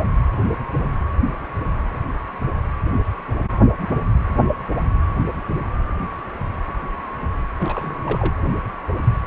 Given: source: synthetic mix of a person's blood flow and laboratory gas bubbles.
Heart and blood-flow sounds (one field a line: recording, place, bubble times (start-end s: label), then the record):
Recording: Doppler ultrasound of blood flow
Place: precordium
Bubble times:
7.59-7.96 s: bubbles
8.05-8.35 s: bubbles
From the record:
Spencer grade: 1 (occasional bubble signal discernible with the cardiac motion signal, with majority of cardiac periods free of bubbles)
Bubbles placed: anywhere in the cardiac cycle